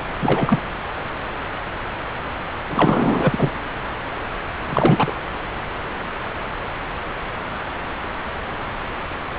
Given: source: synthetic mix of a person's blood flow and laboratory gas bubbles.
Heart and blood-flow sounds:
Doppler ultrasound of blood flow; subclavian vein
0.22-0.59 s: bubbles
2.68-3.50 s: bubbles
4.67-5.13 s: bubbles
From the record:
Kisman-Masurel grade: 223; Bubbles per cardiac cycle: several, 3 to 8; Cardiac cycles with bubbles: 10 to 50%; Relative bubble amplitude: loud (0.450 to 0.775); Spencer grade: 2 (many but less than half of the cardiac periods contain bubble signals, singularly or in groups); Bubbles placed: anywhere in the cardiac cycle

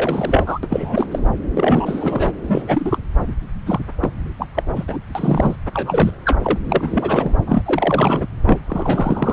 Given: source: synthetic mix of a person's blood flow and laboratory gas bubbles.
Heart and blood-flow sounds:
Doppler ultrasound of blood flow; subclavian vein
0.00-0.59 s: bubbles
0.63-1.07 s: bubbles
1.11-1.19 s: bubbles
1.55-2.32 s: bubbles
2.44-2.98 s: bubbles
3.65-3.79 s: bubbles
4.01-4.09 s: bubbles
4.39-4.46 s: bubbles
4.54-4.63 s: bubbles
4.76-4.85 s: bubbles
4.88-4.99 s: bubbles
5.15-5.56 s: bubbles
5.73-6.11 s: bubbles
6.25-6.38 s: bubbles
6.42-6.58 s: bubbles
6.65-7.32 s: bubbles
7.46-7.62 s: bubbles
7.65-8.27 s: bubbles
8.46-8.60 s: bubbles
8.68-9.33 s: bubbles
From the record:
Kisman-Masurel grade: 343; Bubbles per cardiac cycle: rolling drumbeat, 9 or more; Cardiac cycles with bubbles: 100%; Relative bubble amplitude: loud (0.450 to 0.775); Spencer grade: 3 (all of the cardiac periods contain showers or single bubble signals, but not dominating or overriding the cardiac motion signals); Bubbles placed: anywhere in the cardiac cycle

